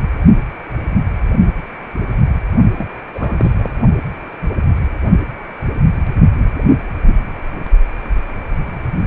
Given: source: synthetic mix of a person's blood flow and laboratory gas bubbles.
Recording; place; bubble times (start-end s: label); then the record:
Doppler ultrasound of blood flow; precordium
2.73-2.86 s: bubbles
3.14-3.55 s: bubbles
3.58-3.71 s: bubbles
From the record:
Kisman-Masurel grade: 212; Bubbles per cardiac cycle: several, 3 to 8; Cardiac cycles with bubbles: 1 to 10%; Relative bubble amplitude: moderate (0.250 to 0.450); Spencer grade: 1 (occasional bubble signal discernible with the cardiac motion signal, with majority of cardiac periods free of bubbles); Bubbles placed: only in the low amplitude regions of the cardiac cycle